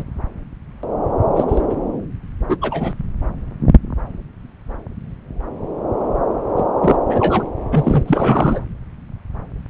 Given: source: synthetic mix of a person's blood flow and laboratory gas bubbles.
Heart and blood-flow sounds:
Doppler ultrasound of blood flow; subclavian vein
0.00-0.04 s: bubbles
1.33-1.45 s: bubbles
1.48-1.61 s: bubbles
1.69-1.75 s: bubbles
2.49-2.58 s: bubbles
2.61-2.93 s: bubbles
6.56-6.65 s: bubbles
6.82-6.97 s: bubbles
7.09-7.43 s: bubbles
7.71-8.03 s: bubbles
8.05-8.60 s: bubbles
From the record:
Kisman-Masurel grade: 223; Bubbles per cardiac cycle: several, 3 to 8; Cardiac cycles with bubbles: 10 to 50%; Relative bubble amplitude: loud (0.450 to 0.775); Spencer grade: 2 (many but less than half of the cardiac periods contain bubble signals, singularly or in groups); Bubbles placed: anywhere in the cardiac cycle

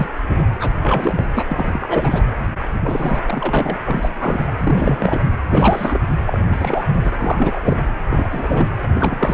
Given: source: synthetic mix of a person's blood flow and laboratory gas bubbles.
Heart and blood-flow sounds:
Doppler ultrasound of blood flow; precordium
0.00-0.07 s: bubbles
0.29-0.50 s: bubbles
0.59-0.71 s: bubbles
0.82-1.27 s: bubbles
1.34-1.44 s: bubbles
1.49-2.22 s: bubbles
2.75-3.76 s: bubbles
3.83-4.48 s: bubbles
4.58-5.21 s: bubbles
5.50-5.99 s: bubbles
6.26-6.40 s: bubbles
6.52-6.88 s: bubbles
6.94-7.00 s: bubbles
7.03-7.11 s: bubbles
7.19-7.83 s: bubbles
8.10-8.28 s: bubbles
8.31-8.71 s: bubbles
8.94-9.33 s: bubbles
From the record:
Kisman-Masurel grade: 342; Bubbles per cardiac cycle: rolling drumbeat, 9 or more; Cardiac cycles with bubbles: 100%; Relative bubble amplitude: moderate (0.250 to 0.450); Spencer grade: 3 (all of the cardiac periods contain showers or single bubble signals, but not dominating or overriding the cardiac motion signals); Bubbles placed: anywhere in the cardiac cycle

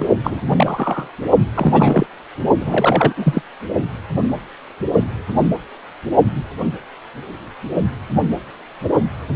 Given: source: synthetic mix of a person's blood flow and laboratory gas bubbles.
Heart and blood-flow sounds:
Doppler ultrasound of blood flow; precordium
0.00-0.06 s: bubbles
0.24-0.41 s: bubbles
0.48-1.08 s: bubbles
1.54-2.06 s: bubbles
2.60-3.41 s: bubbles
From the record:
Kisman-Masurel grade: 223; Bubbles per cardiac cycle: several, 3 to 8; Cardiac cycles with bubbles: 10 to 50%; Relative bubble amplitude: loud (0.450 to 0.775); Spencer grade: 2 (many but less than half of the cardiac periods contain bubble signals, singularly or in groups); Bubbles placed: only in the low amplitude regions of the cardiac cycle

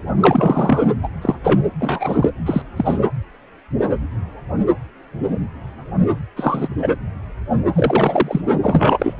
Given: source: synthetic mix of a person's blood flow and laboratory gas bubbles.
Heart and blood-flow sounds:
Doppler ultrasound of blood flow; precordium
0.20-0.83 s: bubbles
1.03-1.08 s: bubbles
1.21-1.35 s: bubbles
1.43-1.60 s: bubbles
1.79-2.29 s: bubbles
2.46-2.62 s: bubbles
2.76-2.99 s: bubbles
6.37-6.68 s: bubbles
6.81-6.88 s: bubbles
7.75-8.41 s: bubbles
8.62-9.14 s: bubbles
From the record:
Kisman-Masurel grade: 233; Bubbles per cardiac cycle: several, 3 to 8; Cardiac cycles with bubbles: 50 to 99%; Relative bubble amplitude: loud (0.450 to 0.775); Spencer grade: 3 (all of the cardiac periods contain showers or single bubble signals, but not dominating or overriding the cardiac motion signals); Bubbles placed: anywhere in the cardiac cycle

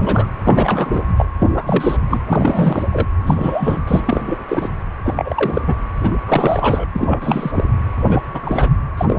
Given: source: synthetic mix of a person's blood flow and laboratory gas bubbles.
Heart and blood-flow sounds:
Doppler ultrasound of blood flow; precordium
0.00-0.29 s: bubbles
0.44-1.02 s: bubbles
1.17-1.25 s: bubbles
1.39-1.97 s: bubbles
2.10-2.19 s: bubbles
2.27-2.86 s: bubbles
2.92-3.06 s: bubbles
3.27-3.79 s: bubbles
3.87-4.23 s: bubbles
4.27-4.38 s: bubbles
4.48-4.70 s: bubbles
5.03-5.62 s: bubbles
5.67-5.75 s: bubbles
6.03-6.11 s: bubbles
6.28-6.87 s: bubbles
6.95-7.51 s: bubbles
7.54-7.64 s: bubbles
8.06-8.21 s: bubbles
8.33-8.71 s: bubbles
8.97-9.19 s: bubbles
From the record:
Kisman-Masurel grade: 342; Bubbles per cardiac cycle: rolling drumbeat, 9 or more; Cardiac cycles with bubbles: 100%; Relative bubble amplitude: moderate (0.250 to 0.450); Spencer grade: 3 (all of the cardiac periods contain showers or single bubble signals, but not dominating or overriding the cardiac motion signals); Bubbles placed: anywhere in the cardiac cycle

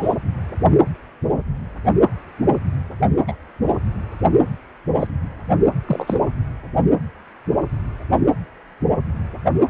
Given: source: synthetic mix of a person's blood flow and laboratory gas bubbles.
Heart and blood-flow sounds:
Doppler ultrasound of blood flow; precordium
0.00-0.15 s: bubbles
3.27-3.35 s: bubbles
4.99-5.07 s: bubbles
5.87-6.15 s: bubbles
From the record:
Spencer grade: 2 (many but less than half of the cardiac periods contain bubble signals, singularly or in groups); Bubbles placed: anywhere in the cardiac cycle

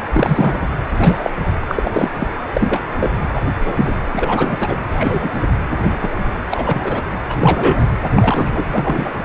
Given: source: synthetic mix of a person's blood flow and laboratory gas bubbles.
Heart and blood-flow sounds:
Doppler ultrasound of blood flow; precordium
0.12-0.68 s: bubbles
0.97-1.30 s: bubbles
1.67-2.11 s: bubbles
2.17-2.27 s: bubbles
2.54-2.80 s: bubbles
2.98-3.10 s: bubbles
3.33-3.42 s: bubbles
3.64-3.96 s: bubbles
4.12-4.79 s: bubbles
4.91-5.42 s: bubbles
5.83-5.97 s: bubbles
6.00-6.10 s: bubbles
6.17-6.21 s: bubbles
6.50-7.02 s: bubbles
7.27-7.83 s: bubbles
8.12-8.65 s: bubbles
8.71-9.13 s: bubbles
From the record:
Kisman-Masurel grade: 243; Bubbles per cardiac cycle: several, 3 to 8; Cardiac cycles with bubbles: 100%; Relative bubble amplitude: loud (0.450 to 0.775); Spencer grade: 3 (all of the cardiac periods contain showers or single bubble signals, but not dominating or overriding the cardiac motion signals); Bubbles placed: anywhere in the cardiac cycle

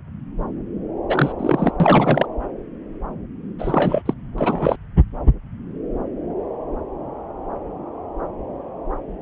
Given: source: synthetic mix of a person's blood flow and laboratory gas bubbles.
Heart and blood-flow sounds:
Doppler ultrasound of blood flow; subclavian vein
1.08-1.33 s: bubbles
1.38-1.72 s: bubbles
1.80-2.26 s: bubbles
3.58-4.02 s: bubbles
4.05-4.13 s: bubbles
4.38-4.77 s: bubbles
From the record:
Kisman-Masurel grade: 222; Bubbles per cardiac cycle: several, 3 to 8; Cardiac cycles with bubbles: 10 to 50%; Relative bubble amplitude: moderate (0.250 to 0.450); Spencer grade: 2 (many but less than half of the cardiac periods contain bubble signals, singularly or in groups); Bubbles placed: anywhere in the cardiac cycle

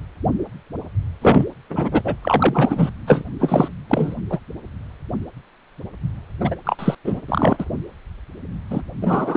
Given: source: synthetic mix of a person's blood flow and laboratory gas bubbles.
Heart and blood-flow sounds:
Doppler ultrasound of blood flow; precordium
1.22-1.51 s: bubbles
1.70-2.01 s: bubbles
2.04-2.16 s: bubbles
2.22-2.89 s: bubbles
3.07-3.22 s: bubbles
3.39-3.68 s: bubbles
3.88-4.15 s: bubbles
4.29-4.39 s: bubbles
6.40-6.55 s: bubbles
6.64-6.76 s: bubbles
6.79-6.95 s: bubbles
7.04-7.21 s: bubbles
7.29-7.65 s: bubbles
8.70-8.82 s: bubbles
9.01-9.37 s: bubbles
From the record:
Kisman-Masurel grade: 333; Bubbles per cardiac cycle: rolling drumbeat, 9 or more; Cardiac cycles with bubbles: 50 to 99%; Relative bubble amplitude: loud (0.450 to 0.775); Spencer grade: 3 (all of the cardiac periods contain showers or single bubble signals, but not dominating or overriding the cardiac motion signals); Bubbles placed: anywhere in the cardiac cycle

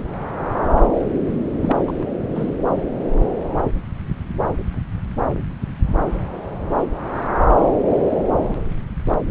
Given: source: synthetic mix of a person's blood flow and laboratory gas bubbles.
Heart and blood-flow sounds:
Doppler ultrasound of blood flow; subclavian vein
1.62-2.05 s: bubbles
2.35-2.51 s: bubbles
From the record:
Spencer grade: 1 (occasional bubble signal discernible with the cardiac motion signal, with majority of cardiac periods free of bubbles); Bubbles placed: anywhere in the cardiac cycle

